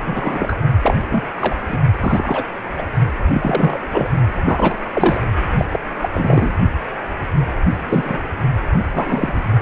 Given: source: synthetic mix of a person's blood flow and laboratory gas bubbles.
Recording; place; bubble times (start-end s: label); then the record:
Doppler ultrasound of blood flow; precordium
0.00-0.58 s: bubbles
0.83-1.02 s: bubbles
1.10-1.23 s: bubbles
1.40-1.56 s: bubbles
1.67-1.78 s: bubbles
2.00-2.44 s: bubbles
2.78-2.86 s: bubbles
3.32-3.79 s: bubbles
3.91-4.10 s: bubbles
4.45-4.78 s: bubbles
4.93-5.21 s: bubbles
5.57-5.65 s: bubbles
5.72-5.79 s: bubbles
6.02-6.09 s: bubbles
6.14-6.53 s: bubbles
7.88-8.18 s: bubbles
8.94-9.44 s: bubbles
From the record:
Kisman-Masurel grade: 243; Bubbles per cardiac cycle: several, 3 to 8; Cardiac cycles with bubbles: 100%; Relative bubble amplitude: loud (0.450 to 0.775); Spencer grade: 3 (all of the cardiac periods contain showers or single bubble signals, but not dominating or overriding the cardiac motion signals); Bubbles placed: only in the low amplitude regions of the cardiac cycle